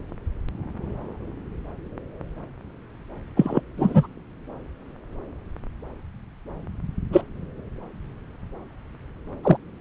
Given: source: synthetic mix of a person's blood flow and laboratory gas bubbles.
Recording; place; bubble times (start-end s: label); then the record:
Doppler ultrasound of blood flow; subclavian vein
3.36-3.60 s: bubbles
3.77-4.07 s: bubbles
7.12-7.21 s: bubbles
9.43-9.57 s: bubbles
From the record:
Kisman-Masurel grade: 123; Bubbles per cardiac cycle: 1 to 2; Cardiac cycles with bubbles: 10 to 50%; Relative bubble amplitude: loud (0.450 to 0.775); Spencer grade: 2 (many but less than half of the cardiac periods contain bubble signals, singularly or in groups); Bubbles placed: anywhere in the cardiac cycle